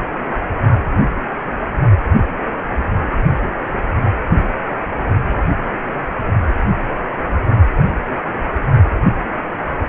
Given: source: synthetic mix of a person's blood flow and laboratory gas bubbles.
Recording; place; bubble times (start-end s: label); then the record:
Doppler ultrasound of blood flow; precordium
no bubbles
From the record:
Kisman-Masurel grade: 000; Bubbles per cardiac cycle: 0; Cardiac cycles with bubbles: 0%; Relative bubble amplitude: no bubbles discernible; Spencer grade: 0 (complete lack of bubble signals)